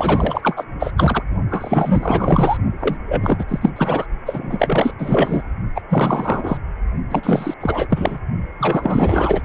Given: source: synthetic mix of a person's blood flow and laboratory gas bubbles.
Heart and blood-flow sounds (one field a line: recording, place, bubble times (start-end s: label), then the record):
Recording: Doppler ultrasound of blood flow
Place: precordium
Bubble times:
0.00-0.65 s: bubbles
0.79-0.92 s: bubbles
0.96-1.23 s: bubbles
1.50-2.57 s: bubbles
2.79-2.97 s: bubbles
3.05-3.45 s: bubbles
3.48-3.72 s: bubbles
3.76-4.05 s: bubbles
4.25-4.94 s: bubbles
4.98-5.43 s: bubbles
5.75-5.81 s: bubbles
5.89-6.57 s: bubbles
7.09-7.54 s: bubbles
7.60-7.87 s: bubbles
7.90-8.18 s: bubbles
8.59-9.41 s: bubbles
From the record:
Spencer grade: 4 (maximum detectable bubble signal sounding continuously throughout systole and diastole of every cardiac period, and overriding the amplitude of the normal cardiac signals)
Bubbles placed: only in the low amplitude regions of the cardiac cycle